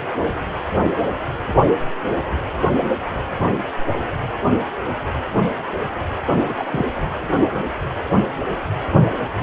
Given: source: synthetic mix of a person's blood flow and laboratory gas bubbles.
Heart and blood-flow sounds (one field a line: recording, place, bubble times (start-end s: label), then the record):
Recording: Doppler ultrasound of blood flow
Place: precordium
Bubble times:
6.45-6.54 s: bubbles
6.58-6.85 s: bubbles
From the record:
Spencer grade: 1 (occasional bubble signal discernible with the cardiac motion signal, with majority of cardiac periods free of bubbles)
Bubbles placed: anywhere in the cardiac cycle